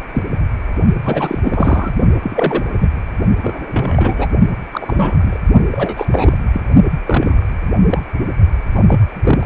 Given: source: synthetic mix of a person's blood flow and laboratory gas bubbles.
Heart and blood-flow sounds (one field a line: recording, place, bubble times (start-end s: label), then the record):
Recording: Doppler ultrasound of blood flow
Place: precordium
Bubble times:
0.13-0.24 s: bubbles
1.03-1.39 s: bubbles
1.44-1.91 s: bubbles
2.23-2.64 s: bubbles
2.80-2.90 s: bubbles
3.43-4.29 s: bubbles
4.71-5.38 s: bubbles
5.71-6.05 s: bubbles
6.10-6.38 s: bubbles
6.52-6.61 s: bubbles
7.06-7.46 s: bubbles
7.89-8.03 s: bubbles
8.75-8.81 s: bubbles
8.88-9.04 s: bubbles
9.08-9.46 s: bubbles
From the record:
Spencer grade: 3 (all of the cardiac periods contain showers or single bubble signals, but not dominating or overriding the cardiac motion signals)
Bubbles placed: only in the low amplitude regions of the cardiac cycle